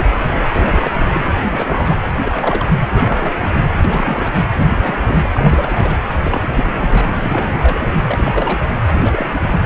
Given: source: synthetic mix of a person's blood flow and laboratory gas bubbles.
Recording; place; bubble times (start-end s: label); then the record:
Doppler ultrasound of blood flow; precordium
0.00-0.04 s: bubbles
0.52-1.24 s: bubbles
1.43-1.96 s: bubbles
2.06-2.11 s: bubbles
2.23-2.71 s: bubbles
2.91-3.48 s: bubbles
3.55-3.63 s: bubbles
3.66-3.78 s: bubbles
3.84-4.33 s: bubbles
4.37-4.42 s: bubbles
4.58-4.66 s: bubbles
4.70-5.29 s: bubbles
5.32-5.97 s: bubbles
6.21-7.17 s: bubbles
7.22-7.97 s: bubbles
8.06-8.64 s: bubbles
8.93-9.59 s: bubbles
From the record:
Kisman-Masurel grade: 342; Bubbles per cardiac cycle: rolling drumbeat, 9 or more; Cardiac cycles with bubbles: 100%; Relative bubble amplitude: moderate (0.250 to 0.450); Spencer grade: 3 (all of the cardiac periods contain showers or single bubble signals, but not dominating or overriding the cardiac motion signals); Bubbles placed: anywhere in the cardiac cycle